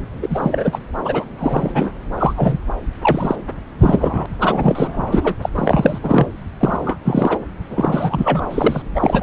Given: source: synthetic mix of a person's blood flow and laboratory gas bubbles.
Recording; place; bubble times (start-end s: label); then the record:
Doppler ultrasound of blood flow; subclavian vein
0.22-0.79 s: bubbles
1.05-1.25 s: bubbles
1.39-1.91 s: bubbles
2.17-2.34 s: bubbles
2.37-2.58 s: bubbles
3.02-3.36 s: bubbles
3.80-4.26 s: bubbles
4.40-5.34 s: bubbles
5.42-5.50 s: bubbles
5.55-5.99 s: bubbles
6.03-6.27 s: bubbles
6.60-6.96 s: bubbles
7.04-7.38 s: bubbles
7.69-8.47 s: bubbles
8.50-8.82 s: bubbles
8.95-9.23 s: bubbles
From the record:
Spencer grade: 3 (all of the cardiac periods contain showers or single bubble signals, but not dominating or overriding the cardiac motion signals); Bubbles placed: anywhere in the cardiac cycle